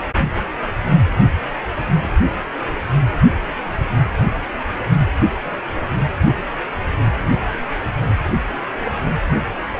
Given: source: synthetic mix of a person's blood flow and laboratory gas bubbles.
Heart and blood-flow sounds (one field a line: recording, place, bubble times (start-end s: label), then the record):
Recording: Doppler ultrasound of blood flow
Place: precordium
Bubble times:
no bubbles
From the record:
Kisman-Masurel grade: 000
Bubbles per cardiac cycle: 0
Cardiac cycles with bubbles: 0%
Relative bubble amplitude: no bubbles discernible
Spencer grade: 0 (complete lack of bubble signals)